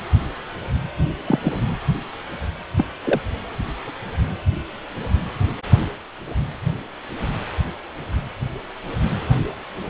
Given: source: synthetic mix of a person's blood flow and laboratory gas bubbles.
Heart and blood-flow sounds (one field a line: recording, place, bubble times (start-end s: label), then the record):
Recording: Doppler ultrasound of blood flow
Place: precordium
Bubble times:
1.26-1.39 s: bubbles
1.44-1.61 s: bubbles
2.77-2.85 s: bubbles
3.04-3.21 s: bubbles
From the record:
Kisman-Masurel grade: 122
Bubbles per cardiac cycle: 1 to 2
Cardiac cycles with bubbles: 10 to 50%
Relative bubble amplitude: moderate (0.250 to 0.450)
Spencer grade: 2 (many but less than half of the cardiac periods contain bubble signals, singularly or in groups)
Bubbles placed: anywhere in the cardiac cycle